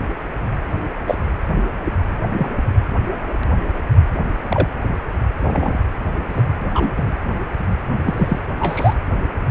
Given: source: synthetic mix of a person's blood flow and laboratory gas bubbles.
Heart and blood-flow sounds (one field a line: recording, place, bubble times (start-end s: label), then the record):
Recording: Doppler ultrasound of blood flow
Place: precordium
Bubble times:
1.06-1.15 s: bubbles
2.37-2.49 s: bubbles
4.49-4.67 s: bubbles
5.41-5.78 s: bubbles
6.29-6.42 s: bubbles
6.70-6.92 s: bubbles
6.96-7.17 s: bubbles
8.04-8.39 s: bubbles
8.59-8.94 s: bubbles
From the record:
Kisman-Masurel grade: 122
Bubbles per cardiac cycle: 1 to 2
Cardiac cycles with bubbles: 10 to 50%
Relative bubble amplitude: moderate (0.250 to 0.450)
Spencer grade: 2 (many but less than half of the cardiac periods contain bubble signals, singularly or in groups)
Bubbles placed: anywhere in the cardiac cycle